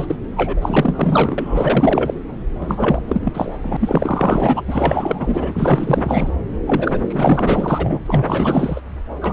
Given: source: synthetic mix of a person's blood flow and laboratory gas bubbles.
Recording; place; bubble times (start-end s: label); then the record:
Doppler ultrasound of blood flow; subclavian vein
0.00-0.16 s: bubbles
0.36-2.14 s: bubbles
2.60-3.02 s: bubbles
3.08-3.56 s: bubbles
3.63-3.77 s: bubbles
3.81-4.62 s: bubbles
4.67-6.33 s: bubbles
6.66-8.02 s: bubbles
8.05-8.81 s: bubbles
9.21-9.33 s: bubbles
From the record:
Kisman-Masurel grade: 444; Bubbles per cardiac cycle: continuous sound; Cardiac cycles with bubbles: 100%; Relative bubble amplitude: maximal (0.775 to 0.999); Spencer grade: 4 (maximum detectable bubble signal sounding continuously throughout systole and diastole of every cardiac period, and overriding the amplitude of the normal cardiac signals); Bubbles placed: anywhere in the cardiac cycle